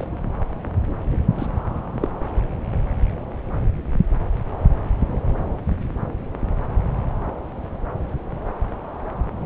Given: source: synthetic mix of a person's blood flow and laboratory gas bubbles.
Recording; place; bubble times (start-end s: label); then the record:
Doppler ultrasound of blood flow; subclavian vein
0.00-0.04 s: bubbles
1.38-1.46 s: bubbles
2.01-2.10 s: bubbles
From the record:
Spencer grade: 2 (many but less than half of the cardiac periods contain bubble signals, singularly or in groups); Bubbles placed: anywhere in the cardiac cycle